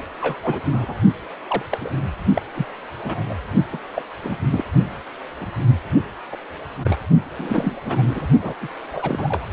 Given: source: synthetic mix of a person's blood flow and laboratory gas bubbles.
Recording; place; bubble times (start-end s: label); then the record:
Doppler ultrasound of blood flow; precordium
0.21-0.38 s: bubbles
0.42-0.61 s: bubbles
0.72-0.94 s: bubbles
1.50-1.62 s: bubbles
1.71-1.78 s: bubbles
1.81-1.90 s: bubbles
2.34-2.42 s: bubbles
2.54-2.67 s: bubbles
3.03-3.23 s: bubbles
3.29-3.33 s: bubbles
3.73-3.79 s: bubbles
3.96-4.03 s: bubbles
4.24-4.36 s: bubbles
4.51-4.64 s: bubbles
5.41-5.47 s: bubbles
6.31-6.37 s: bubbles
6.84-6.99 s: bubbles
7.38-7.80 s: bubbles
7.84-8.29 s: bubbles
8.42-8.54 s: bubbles
8.61-8.68 s: bubbles
8.93-9.46 s: bubbles
From the record:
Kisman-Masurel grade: 242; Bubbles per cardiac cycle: several, 3 to 8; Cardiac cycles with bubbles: 100%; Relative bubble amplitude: moderate (0.250 to 0.450); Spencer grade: 3 (all of the cardiac periods contain showers or single bubble signals, but not dominating or overriding the cardiac motion signals); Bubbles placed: only in the low amplitude regions of the cardiac cycle